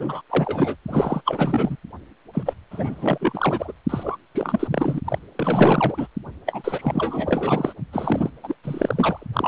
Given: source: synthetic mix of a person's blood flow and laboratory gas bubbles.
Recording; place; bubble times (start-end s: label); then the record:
Doppler ultrasound of blood flow; precordium
0.00-0.22 s: bubbles
0.29-0.76 s: bubbles
0.88-1.22 s: bubbles
1.25-1.76 s: bubbles
2.33-2.54 s: bubbles
2.71-3.72 s: bubbles
3.89-4.17 s: bubbles
4.34-4.67 s: bubbles
4.71-5.00 s: bubbles
5.04-5.18 s: bubbles
5.36-6.08 s: bubbles
6.46-7.74 s: bubbles
7.92-8.30 s: bubbles
8.43-8.55 s: bubbles
8.63-9.26 s: bubbles
9.33-9.48 s: bubbles
From the record:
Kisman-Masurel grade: 444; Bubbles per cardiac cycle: continuous sound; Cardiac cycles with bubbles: 100%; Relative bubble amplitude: maximal (0.775 to 0.999); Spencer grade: 4 (maximum detectable bubble signal sounding continuously throughout systole and diastole of every cardiac period, and overriding the amplitude of the normal cardiac signals); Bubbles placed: anywhere in the cardiac cycle